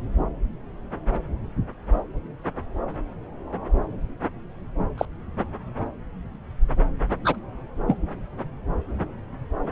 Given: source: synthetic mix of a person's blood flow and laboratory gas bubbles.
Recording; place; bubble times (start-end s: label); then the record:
Doppler ultrasound of blood flow; subclavian vein
4.97-5.05 s: bubbles
7.25-7.36 s: bubbles
7.87-7.98 s: bubbles
From the record:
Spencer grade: 2 (many but less than half of the cardiac periods contain bubble signals, singularly or in groups); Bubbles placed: anywhere in the cardiac cycle